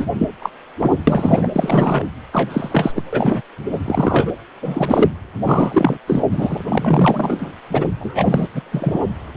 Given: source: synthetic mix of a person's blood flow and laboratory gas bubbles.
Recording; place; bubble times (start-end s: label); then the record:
Doppler ultrasound of blood flow; precordium
0.00-0.05 s: bubbles
0.18-0.28 s: bubbles
0.42-0.49 s: bubbles
0.80-0.92 s: bubbles
1.07-1.50 s: bubbles
1.54-2.03 s: bubbles
2.32-2.92 s: bubbles
2.95-3.02 s: bubbles
3.12-3.41 s: bubbles
3.72-3.79 s: bubbles
3.84-4.32 s: bubbles
4.62-5.09 s: bubbles
5.45-5.98 s: bubbles
6.07-6.24 s: bubbles
6.31-6.65 s: bubbles
6.69-7.53 s: bubbles
7.72-7.92 s: bubbles
7.99-8.46 s: bubbles
8.54-8.62 s: bubbles
8.71-9.05 s: bubbles
From the record:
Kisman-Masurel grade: 243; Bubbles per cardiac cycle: several, 3 to 8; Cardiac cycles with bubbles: 100%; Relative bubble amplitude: loud (0.450 to 0.775); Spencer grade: 3 (all of the cardiac periods contain showers or single bubble signals, but not dominating or overriding the cardiac motion signals); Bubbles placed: anywhere in the cardiac cycle